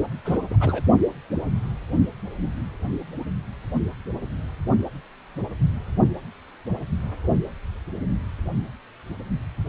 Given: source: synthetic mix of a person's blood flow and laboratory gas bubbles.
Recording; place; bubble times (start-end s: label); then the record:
Doppler ultrasound of blood flow; precordium
0.24-0.38 s: bubbles
0.50-0.56 s: bubbles
0.60-0.81 s: bubbles
From the record:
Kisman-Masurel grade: 221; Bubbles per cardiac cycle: several, 3 to 8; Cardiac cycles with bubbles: 10 to 50%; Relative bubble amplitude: barely perceptible (0.100 to 0.250); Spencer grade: 2 (many but less than half of the cardiac periods contain bubble signals, singularly or in groups); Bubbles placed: only in the low amplitude regions of the cardiac cycle